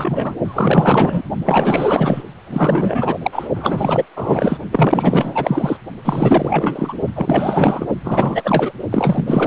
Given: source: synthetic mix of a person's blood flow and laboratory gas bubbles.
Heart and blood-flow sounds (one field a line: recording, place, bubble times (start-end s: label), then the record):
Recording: Doppler ultrasound of blood flow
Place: precordium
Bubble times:
0.00-0.35 s: bubbles
0.45-1.23 s: bubbles
1.45-2.23 s: bubbles
2.46-3.19 s: bubbles
3.22-3.48 s: bubbles
3.55-4.05 s: bubbles
4.16-4.57 s: bubbles
4.71-5.77 s: bubbles
6.04-6.94 s: bubbles
7.15-7.85 s: bubbles
8.04-8.72 s: bubbles
8.91-9.47 s: bubbles
From the record:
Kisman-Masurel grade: 444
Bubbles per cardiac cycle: continuous sound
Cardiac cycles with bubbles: 100%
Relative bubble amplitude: maximal (0.775 to 0.999)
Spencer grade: 4 (maximum detectable bubble signal sounding continuously throughout systole and diastole of every cardiac period, and overriding the amplitude of the normal cardiac signals)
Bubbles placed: only in the low amplitude regions of the cardiac cycle